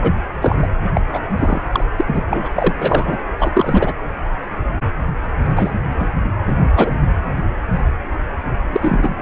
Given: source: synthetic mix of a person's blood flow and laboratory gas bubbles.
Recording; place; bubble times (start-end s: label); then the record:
Doppler ultrasound of blood flow; precordium
0.02-0.12 s: bubbles
0.41-0.68 s: bubbles
0.94-1.01 s: bubbles
1.13-1.20 s: bubbles
1.36-1.64 s: bubbles
1.75-1.84 s: bubbles
1.96-2.24 s: bubbles
2.28-2.48 s: bubbles
2.56-2.74 s: bubbles
2.79-3.21 s: bubbles
3.39-3.93 s: bubbles
5.39-5.74 s: bubbles
5.99-6.06 s: bubbles
6.47-6.56 s: bubbles
6.74-7.10 s: bubbles
8.72-9.14 s: bubbles
From the record:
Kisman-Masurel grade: 233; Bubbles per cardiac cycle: several, 3 to 8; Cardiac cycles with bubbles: 50 to 99%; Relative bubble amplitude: loud (0.450 to 0.775); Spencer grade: 3 (all of the cardiac periods contain showers or single bubble signals, but not dominating or overriding the cardiac motion signals); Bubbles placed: anywhere in the cardiac cycle